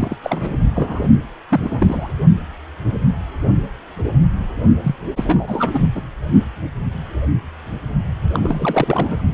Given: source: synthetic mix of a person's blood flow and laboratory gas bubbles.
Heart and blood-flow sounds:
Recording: Doppler ultrasound of blood flow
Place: precordium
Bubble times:
0.00-0.15 s: bubbles
0.23-0.56 s: bubbles
0.73-1.09 s: bubbles
1.50-2.12 s: bubbles
4.83-4.96 s: bubbles
5.16-5.80 s: bubbles
5.95-6.03 s: bubbles
8.33-9.22 s: bubbles
From the record:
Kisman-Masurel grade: 332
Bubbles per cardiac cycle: rolling drumbeat, 9 or more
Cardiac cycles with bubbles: 50 to 99%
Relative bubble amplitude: moderate (0.250 to 0.450)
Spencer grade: 3 (all of the cardiac periods contain showers or single bubble signals, but not dominating or overriding the cardiac motion signals)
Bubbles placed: only in the low amplitude regions of the cardiac cycle

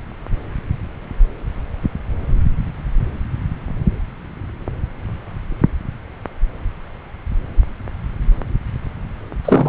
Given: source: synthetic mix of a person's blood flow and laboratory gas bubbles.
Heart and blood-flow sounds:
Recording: Doppler ultrasound of blood flow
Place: subclavian vein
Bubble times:
9.45-9.69 s: bubbles
From the record:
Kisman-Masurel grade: 212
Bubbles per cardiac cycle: several, 3 to 8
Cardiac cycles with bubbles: 1 to 10%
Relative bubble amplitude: moderate (0.250 to 0.450)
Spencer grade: 1 (occasional bubble signal discernible with the cardiac motion signal, with majority of cardiac periods free of bubbles)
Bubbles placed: anywhere in the cardiac cycle

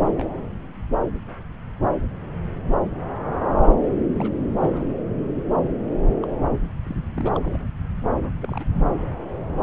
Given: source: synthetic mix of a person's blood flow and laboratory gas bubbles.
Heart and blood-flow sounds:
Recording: Doppler ultrasound of blood flow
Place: subclavian vein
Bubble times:
0.05-0.27 s: bubbles
4.19-4.33 s: bubbles
4.57-4.95 s: bubbles
6.22-6.26 s: bubbles
6.86-6.95 s: bubbles
7.17-7.39 s: bubbles
7.43-7.62 s: bubbles
8.23-8.32 s: bubbles
8.42-8.65 s: bubbles
8.76-8.87 s: bubbles
From the record:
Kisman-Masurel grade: 221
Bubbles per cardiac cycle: several, 3 to 8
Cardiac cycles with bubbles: 10 to 50%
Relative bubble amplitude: barely perceptible (0.100 to 0.250)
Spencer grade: 2 (many but less than half of the cardiac periods contain bubble signals, singularly or in groups)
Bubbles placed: anywhere in the cardiac cycle

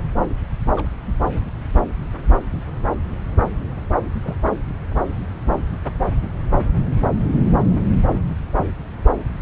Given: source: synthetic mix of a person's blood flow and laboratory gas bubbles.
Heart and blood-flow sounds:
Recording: Doppler ultrasound of blood flow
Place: subclavian vein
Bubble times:
0.76-0.89 s: bubbles
1.32-1.48 s: bubbles
4.22-4.36 s: bubbles
From the record:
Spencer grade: 2 (many but less than half of the cardiac periods contain bubble signals, singularly or in groups)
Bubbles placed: anywhere in the cardiac cycle

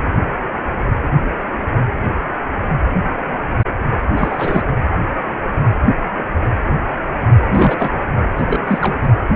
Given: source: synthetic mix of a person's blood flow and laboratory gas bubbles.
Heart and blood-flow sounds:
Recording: Doppler ultrasound of blood flow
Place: precordium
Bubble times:
4.16-4.64 s: bubbles
7.51-7.91 s: bubbles
8.36-8.60 s: bubbles
8.66-8.96 s: bubbles
9.03-9.10 s: bubbles
From the record:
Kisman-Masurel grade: 222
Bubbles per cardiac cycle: several, 3 to 8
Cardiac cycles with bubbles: 10 to 50%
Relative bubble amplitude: moderate (0.250 to 0.450)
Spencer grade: 2 (many but less than half of the cardiac periods contain bubble signals, singularly or in groups)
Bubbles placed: anywhere in the cardiac cycle

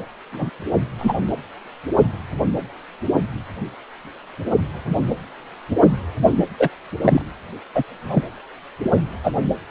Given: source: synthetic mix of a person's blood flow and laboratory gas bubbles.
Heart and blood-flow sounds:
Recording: Doppler ultrasound of blood flow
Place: precordium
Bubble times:
0.32-0.49 s: bubbles
0.98-1.14 s: bubbles
6.59-6.69 s: bubbles
7.01-7.22 s: bubbles
7.75-7.83 s: bubbles
8.10-8.23 s: bubbles
9.23-9.32 s: bubbles
From the record:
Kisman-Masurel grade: 123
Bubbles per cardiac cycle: 1 to 2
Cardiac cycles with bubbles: 10 to 50%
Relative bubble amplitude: loud (0.450 to 0.775)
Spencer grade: 2 (many but less than half of the cardiac periods contain bubble signals, singularly or in groups)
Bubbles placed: anywhere in the cardiac cycle

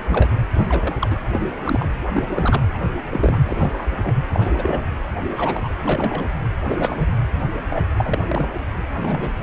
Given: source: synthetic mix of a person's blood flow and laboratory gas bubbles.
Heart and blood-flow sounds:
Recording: Doppler ultrasound of blood flow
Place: precordium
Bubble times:
0.09-0.39 s: bubbles
0.55-0.96 s: bubbles
0.99-1.17 s: bubbles
1.32-1.42 s: bubbles
1.65-1.89 s: bubbles
2.09-2.61 s: bubbles
2.74-2.79 s: bubbles
3.11-3.39 s: bubbles
3.45-3.89 s: bubbles
4.03-4.15 s: bubbles
4.30-4.82 s: bubbles
5.29-5.74 s: bubbles
5.83-6.25 s: bubbles
6.68-7.07 s: bubbles
7.71-7.85 s: bubbles
7.96-8.19 s: bubbles
8.29-8.47 s: bubbles
8.96-9.29 s: bubbles
From the record:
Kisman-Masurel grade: 242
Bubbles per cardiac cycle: several, 3 to 8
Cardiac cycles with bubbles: 100%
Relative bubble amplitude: moderate (0.250 to 0.450)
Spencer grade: 3 (all of the cardiac periods contain showers or single bubble signals, but not dominating or overriding the cardiac motion signals)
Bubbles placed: anywhere in the cardiac cycle

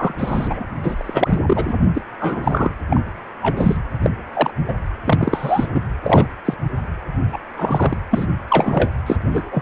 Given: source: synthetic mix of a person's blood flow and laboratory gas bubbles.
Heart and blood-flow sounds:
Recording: Doppler ultrasound of blood flow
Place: precordium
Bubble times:
0.00-0.13 s: bubbles
0.18-0.65 s: bubbles
0.83-1.39 s: bubbles
1.47-1.74 s: bubbles
1.95-2.02 s: bubbles
2.20-2.73 s: bubbles
2.90-3.01 s: bubbles
3.43-3.77 s: bubbles
4.02-4.10 s: bubbles
4.33-4.50 s: bubbles
4.68-4.74 s: bubbles
5.04-5.69 s: bubbles
5.75-5.81 s: bubbles
6.03-6.26 s: bubbles
6.45-6.54 s: bubbles
7.32-7.38 s: bubbles
7.57-7.96 s: bubbles
8.11-8.27 s: bubbles
8.49-8.90 s: bubbles
9.06-9.16 s: bubbles
9.31-9.62 s: bubbles
From the record:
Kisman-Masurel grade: 243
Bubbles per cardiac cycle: several, 3 to 8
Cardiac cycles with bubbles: 100%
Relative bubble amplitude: loud (0.450 to 0.775)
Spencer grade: 3 (all of the cardiac periods contain showers or single bubble signals, but not dominating or overriding the cardiac motion signals)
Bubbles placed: anywhere in the cardiac cycle

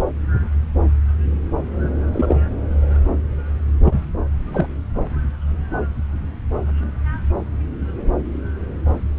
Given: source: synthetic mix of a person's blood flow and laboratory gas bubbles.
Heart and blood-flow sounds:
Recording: Doppler ultrasound of blood flow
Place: subclavian vein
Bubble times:
2.13-2.35 s: bubbles
3.84-4.00 s: bubbles
4.53-4.66 s: bubbles
From the record:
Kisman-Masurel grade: 122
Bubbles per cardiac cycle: 1 to 2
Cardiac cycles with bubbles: 10 to 50%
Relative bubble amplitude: moderate (0.250 to 0.450)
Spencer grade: 2 (many but less than half of the cardiac periods contain bubble signals, singularly or in groups)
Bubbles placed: anywhere in the cardiac cycle

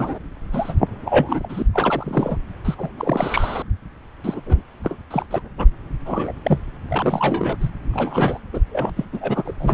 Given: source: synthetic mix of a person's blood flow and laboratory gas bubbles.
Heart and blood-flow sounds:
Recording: Doppler ultrasound of blood flow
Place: subclavian vein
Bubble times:
0.00-0.19 s: bubbles
0.52-0.74 s: bubbles
1.05-1.66 s: bubbles
1.73-2.37 s: bubbles
2.65-2.75 s: bubbles
2.78-2.90 s: bubbles
2.97-3.63 s: bubbles
4.24-4.40 s: bubbles
4.46-4.62 s: bubbles
4.83-4.98 s: bubbles
5.11-5.26 s: bubbles
5.30-5.42 s: bubbles
5.58-5.68 s: bubbles
6.06-6.33 s: bubbles
6.43-6.58 s: bubbles
6.89-7.56 s: bubbles
7.60-7.69 s: bubbles
7.93-8.40 s: bubbles
8.53-8.61 s: bubbles
8.70-8.90 s: bubbles
8.96-9.05 s: bubbles
9.12-9.54 s: bubbles
9.59-9.74 s: bubbles
From the record:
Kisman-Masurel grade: 342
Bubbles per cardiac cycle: rolling drumbeat, 9 or more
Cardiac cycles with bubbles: 100%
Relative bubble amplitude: moderate (0.250 to 0.450)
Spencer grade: 3 (all of the cardiac periods contain showers or single bubble signals, but not dominating or overriding the cardiac motion signals)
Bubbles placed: anywhere in the cardiac cycle

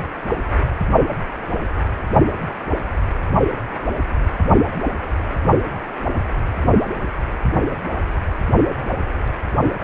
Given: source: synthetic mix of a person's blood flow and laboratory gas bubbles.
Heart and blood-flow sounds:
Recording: Doppler ultrasound of blood flow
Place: precordium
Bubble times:
no bubbles
From the record:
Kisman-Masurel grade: 000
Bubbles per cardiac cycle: 0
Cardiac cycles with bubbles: 0%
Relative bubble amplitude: no bubbles discernible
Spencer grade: 0 (complete lack of bubble signals)

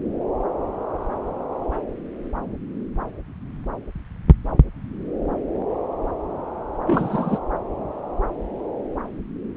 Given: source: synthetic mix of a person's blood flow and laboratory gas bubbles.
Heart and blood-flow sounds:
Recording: Doppler ultrasound of blood flow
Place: subclavian vein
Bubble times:
6.87-7.39 s: bubbles
From the record:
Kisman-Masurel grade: 212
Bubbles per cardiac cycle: several, 3 to 8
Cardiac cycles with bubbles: 1 to 10%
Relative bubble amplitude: moderate (0.250 to 0.450)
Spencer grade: 1 (occasional bubble signal discernible with the cardiac motion signal, with majority of cardiac periods free of bubbles)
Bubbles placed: anywhere in the cardiac cycle

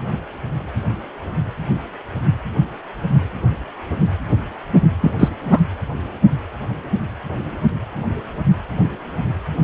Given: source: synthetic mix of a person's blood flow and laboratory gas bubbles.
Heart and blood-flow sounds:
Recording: Doppler ultrasound of blood flow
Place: precordium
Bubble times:
5.01-5.14 s: bubbles
5.20-5.29 s: bubbles
5.42-5.61 s: bubbles
From the record:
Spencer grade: 1 (occasional bubble signal discernible with the cardiac motion signal, with majority of cardiac periods free of bubbles)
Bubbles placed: anywhere in the cardiac cycle

